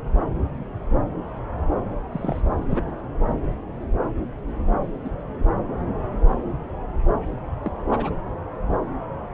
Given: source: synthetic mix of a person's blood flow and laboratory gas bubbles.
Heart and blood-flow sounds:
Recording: Doppler ultrasound of blood flow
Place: subclavian vein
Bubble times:
2.12-2.42 s: bubbles
2.57-2.92 s: bubbles
5.04-5.09 s: bubbles
7.64-7.70 s: bubbles
7.91-8.10 s: bubbles
From the record:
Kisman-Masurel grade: 121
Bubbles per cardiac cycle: 1 to 2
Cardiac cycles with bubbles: 10 to 50%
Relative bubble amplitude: barely perceptible (0.100 to 0.250)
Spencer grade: 2 (many but less than half of the cardiac periods contain bubble signals, singularly or in groups)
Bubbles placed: anywhere in the cardiac cycle

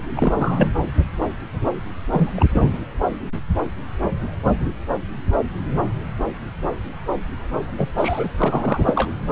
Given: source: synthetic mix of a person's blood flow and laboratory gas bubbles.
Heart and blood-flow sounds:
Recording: Doppler ultrasound of blood flow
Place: subclavian vein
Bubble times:
0.16-0.68 s: bubbles
2.12-2.46 s: bubbles
2.51-2.78 s: bubbles
7.78-7.88 s: bubbles
7.98-8.30 s: bubbles
8.38-9.10 s: bubbles
From the record:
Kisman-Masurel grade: 222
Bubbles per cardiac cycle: several, 3 to 8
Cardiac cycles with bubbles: 10 to 50%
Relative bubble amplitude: moderate (0.250 to 0.450)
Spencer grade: 2 (many but less than half of the cardiac periods contain bubble signals, singularly or in groups)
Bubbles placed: anywhere in the cardiac cycle

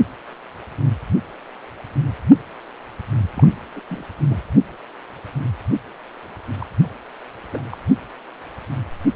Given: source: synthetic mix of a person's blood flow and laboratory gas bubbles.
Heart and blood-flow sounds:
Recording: Doppler ultrasound of blood flow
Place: precordium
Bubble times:
3.35-3.47 s: bubbles
3.76-3.80 s: bubbles
3.89-4.04 s: bubbles
4.29-4.41 s: bubbles
6.60-6.67 s: bubbles
7.50-7.62 s: bubbles
7.70-7.77 s: bubbles
From the record:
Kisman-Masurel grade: 221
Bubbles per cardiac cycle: several, 3 to 8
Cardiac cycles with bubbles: 10 to 50%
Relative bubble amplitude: barely perceptible (0.100 to 0.250)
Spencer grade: 2 (many but less than half of the cardiac periods contain bubble signals, singularly or in groups)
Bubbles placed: only in the low amplitude regions of the cardiac cycle

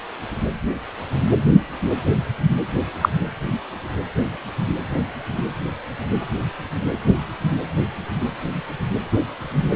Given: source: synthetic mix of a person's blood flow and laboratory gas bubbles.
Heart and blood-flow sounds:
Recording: Doppler ultrasound of blood flow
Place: precordium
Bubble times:
3.01-3.09 s: bubbles
From the record:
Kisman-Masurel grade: 113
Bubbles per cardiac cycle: 1 to 2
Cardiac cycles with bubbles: 1 to 10%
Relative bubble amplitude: loud (0.450 to 0.775)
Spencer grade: 1 (occasional bubble signal discernible with the cardiac motion signal, with majority of cardiac periods free of bubbles)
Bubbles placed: anywhere in the cardiac cycle

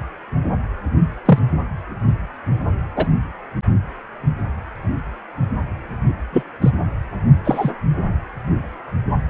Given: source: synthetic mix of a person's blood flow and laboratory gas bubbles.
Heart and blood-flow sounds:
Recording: Doppler ultrasound of blood flow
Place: precordium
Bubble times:
1.25-1.39 s: bubbles
2.95-3.07 s: bubbles
6.33-6.43 s: bubbles
6.61-6.71 s: bubbles
7.44-7.71 s: bubbles
From the record:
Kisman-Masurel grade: 123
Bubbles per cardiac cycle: 1 to 2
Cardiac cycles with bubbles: 10 to 50%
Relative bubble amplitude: loud (0.450 to 0.775)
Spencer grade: 2 (many but less than half of the cardiac periods contain bubble signals, singularly or in groups)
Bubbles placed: only in the low amplitude regions of the cardiac cycle

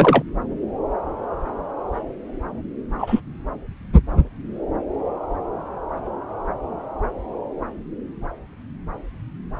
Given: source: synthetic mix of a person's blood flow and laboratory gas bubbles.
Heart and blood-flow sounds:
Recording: Doppler ultrasound of blood flow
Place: subclavian vein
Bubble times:
0.00-0.23 s: bubbles
2.98-3.21 s: bubbles
From the record:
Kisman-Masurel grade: 123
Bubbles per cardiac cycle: 1 to 2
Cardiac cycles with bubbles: 10 to 50%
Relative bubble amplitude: loud (0.450 to 0.775)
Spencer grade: 2 (many but less than half of the cardiac periods contain bubble signals, singularly or in groups)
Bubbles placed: anywhere in the cardiac cycle

